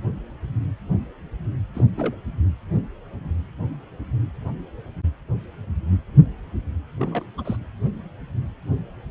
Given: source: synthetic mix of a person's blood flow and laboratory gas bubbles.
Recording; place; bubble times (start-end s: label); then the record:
Doppler ultrasound of blood flow; precordium
1.75-1.85 s: bubbles
1.96-2.15 s: bubbles
6.98-7.25 s: bubbles
7.38-7.57 s: bubbles
From the record:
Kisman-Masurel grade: 221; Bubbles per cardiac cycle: several, 3 to 8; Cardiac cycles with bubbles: 10 to 50%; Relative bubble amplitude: barely perceptible (0.100 to 0.250); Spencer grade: 2 (many but less than half of the cardiac periods contain bubble signals, singularly or in groups); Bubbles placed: anywhere in the cardiac cycle